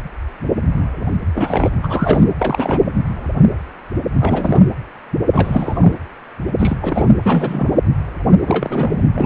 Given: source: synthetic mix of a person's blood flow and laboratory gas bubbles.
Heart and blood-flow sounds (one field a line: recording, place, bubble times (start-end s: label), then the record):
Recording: Doppler ultrasound of blood flow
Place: precordium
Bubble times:
1.34-1.69 s: bubbles
1.83-2.25 s: bubbles
2.38-2.92 s: bubbles
4.20-4.61 s: bubbles
5.32-5.94 s: bubbles
6.59-6.78 s: bubbles
6.81-7.16 s: bubbles
7.22-7.71 s: bubbles
8.46-9.04 s: bubbles
9.12-9.26 s: bubbles
From the record:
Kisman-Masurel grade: 333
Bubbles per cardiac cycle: rolling drumbeat, 9 or more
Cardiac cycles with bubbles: 50 to 99%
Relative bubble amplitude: loud (0.450 to 0.775)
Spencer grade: 3 (all of the cardiac periods contain showers or single bubble signals, but not dominating or overriding the cardiac motion signals)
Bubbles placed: anywhere in the cardiac cycle